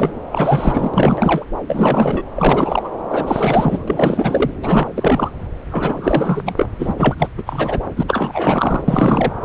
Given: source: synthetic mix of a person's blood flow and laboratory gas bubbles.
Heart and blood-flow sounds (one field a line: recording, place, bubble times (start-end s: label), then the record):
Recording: Doppler ultrasound of blood flow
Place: subclavian vein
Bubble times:
0.00-0.12 s: bubbles
0.32-0.91 s: bubbles
0.93-1.45 s: bubbles
1.67-2.24 s: bubbles
2.37-2.90 s: bubbles
3.09-3.85 s: bubbles
3.88-4.52 s: bubbles
4.62-4.88 s: bubbles
4.94-5.31 s: bubbles
5.71-6.72 s: bubbles
6.78-6.94 s: bubbles
6.97-7.16 s: bubbles
7.18-7.29 s: bubbles
7.37-7.44 s: bubbles
7.46-7.80 s: bubbles
7.96-8.04 s: bubbles
8.07-8.83 s: bubbles
8.88-9.32 s: bubbles
From the record:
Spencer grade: 4 (maximum detectable bubble signal sounding continuously throughout systole and diastole of every cardiac period, and overriding the amplitude of the normal cardiac signals)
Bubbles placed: anywhere in the cardiac cycle